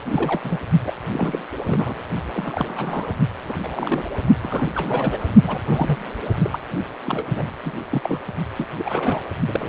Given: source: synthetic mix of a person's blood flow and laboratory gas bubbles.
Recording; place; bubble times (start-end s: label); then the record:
Doppler ultrasound of blood flow; precordium
0.05-0.58 s: bubbles
0.84-0.92 s: bubbles
1.11-1.43 s: bubbles
1.57-1.64 s: bubbles
1.66-2.02 s: bubbles
2.33-3.19 s: bubbles
3.44-3.54 s: bubbles
3.63-4.10 s: bubbles
4.41-5.25 s: bubbles
5.43-5.60 s: bubbles
5.67-5.98 s: bubbles
6.40-6.60 s: bubbles
7.06-7.48 s: bubbles
7.64-7.80 s: bubbles
7.91-8.20 s: bubbles
8.56-8.66 s: bubbles
8.78-9.24 s: bubbles
9.47-9.69 s: bubbles
From the record:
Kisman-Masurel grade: 342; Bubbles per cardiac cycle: rolling drumbeat, 9 or more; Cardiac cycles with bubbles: 100%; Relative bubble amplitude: moderate (0.250 to 0.450); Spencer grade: 3 (all of the cardiac periods contain showers or single bubble signals, but not dominating or overriding the cardiac motion signals); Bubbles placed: only in the low amplitude regions of the cardiac cycle